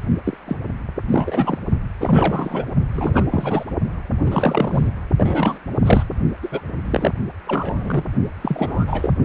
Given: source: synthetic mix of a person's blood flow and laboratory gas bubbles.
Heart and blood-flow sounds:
Doppler ultrasound of blood flow; precordium
0.25-0.37 s: bubbles
0.47-0.56 s: bubbles
1.09-1.58 s: bubbles
2.01-2.65 s: bubbles
2.94-3.64 s: bubbles
4.25-4.90 s: bubbles
5.17-5.58 s: bubbles
5.76-6.17 s: bubbles
6.42-6.61 s: bubbles
6.84-7.13 s: bubbles
7.46-8.04 s: bubbles
8.42-9.13 s: bubbles
From the record:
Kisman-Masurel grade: 343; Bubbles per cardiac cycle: rolling drumbeat, 9 or more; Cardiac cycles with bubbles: 100%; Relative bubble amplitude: loud (0.450 to 0.775); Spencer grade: 3 (all of the cardiac periods contain showers or single bubble signals, but not dominating or overriding the cardiac motion signals); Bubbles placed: only in the low amplitude regions of the cardiac cycle

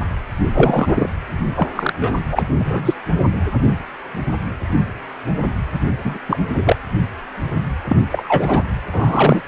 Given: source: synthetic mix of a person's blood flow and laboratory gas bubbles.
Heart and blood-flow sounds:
Doppler ultrasound of blood flow; precordium
0.54-1.09 s: bubbles
1.56-1.69 s: bubbles
1.76-1.93 s: bubbles
2.00-2.21 s: bubbles
2.32-2.42 s: bubbles
2.58-2.94 s: bubbles
6.04-6.18 s: bubbles
6.28-6.37 s: bubbles
6.54-6.76 s: bubbles
7.88-7.96 s: bubbles
8.12-8.63 s: bubbles
8.92-9.41 s: bubbles
From the record:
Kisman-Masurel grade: 233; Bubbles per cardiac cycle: several, 3 to 8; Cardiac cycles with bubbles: 50 to 99%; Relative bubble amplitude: loud (0.450 to 0.775); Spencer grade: 3 (all of the cardiac periods contain showers or single bubble signals, but not dominating or overriding the cardiac motion signals); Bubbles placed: anywhere in the cardiac cycle

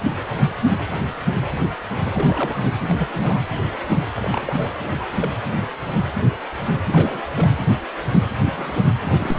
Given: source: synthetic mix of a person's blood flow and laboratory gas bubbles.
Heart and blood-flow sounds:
Doppler ultrasound of blood flow; precordium
2.13-2.62 s: bubbles
2.88-2.94 s: bubbles
2.98-3.40 s: bubbles
4.16-4.72 s: bubbles
4.84-4.89 s: bubbles
4.99-5.04 s: bubbles
5.12-5.32 s: bubbles
6.87-7.24 s: bubbles
7.36-7.47 s: bubbles
8.45-8.54 s: bubbles
8.57-8.89 s: bubbles
9.02-9.39 s: bubbles
From the record:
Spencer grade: 2 (many but less than half of the cardiac periods contain bubble signals, singularly or in groups); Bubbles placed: anywhere in the cardiac cycle

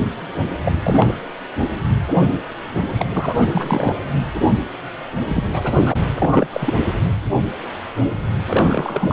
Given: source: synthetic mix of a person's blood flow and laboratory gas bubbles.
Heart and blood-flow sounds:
Doppler ultrasound of blood flow; precordium
0.65-1.15 s: bubbles
2.94-3.08 s: bubbles
3.10-3.98 s: bubbles
5.29-5.43 s: bubbles
5.52-5.97 s: bubbles
6.17-6.47 s: bubbles
6.50-6.74 s: bubbles
8.46-9.13 s: bubbles
From the record:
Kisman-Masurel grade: 332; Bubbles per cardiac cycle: rolling drumbeat, 9 or more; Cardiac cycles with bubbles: 50 to 99%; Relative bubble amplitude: moderate (0.250 to 0.450); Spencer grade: 3 (all of the cardiac periods contain showers or single bubble signals, but not dominating or overriding the cardiac motion signals); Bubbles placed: anywhere in the cardiac cycle

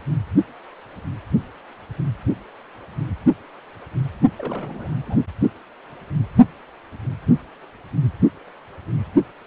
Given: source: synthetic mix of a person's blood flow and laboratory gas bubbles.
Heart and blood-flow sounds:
Doppler ultrasound of blood flow; precordium
4.38-4.92 s: bubbles
5.01-5.17 s: bubbles
From the record:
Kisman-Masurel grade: 221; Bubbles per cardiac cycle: several, 3 to 8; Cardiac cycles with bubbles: 10 to 50%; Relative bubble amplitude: barely perceptible (0.100 to 0.250); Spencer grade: 2 (many but less than half of the cardiac periods contain bubble signals, singularly or in groups); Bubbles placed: only in the low amplitude regions of the cardiac cycle

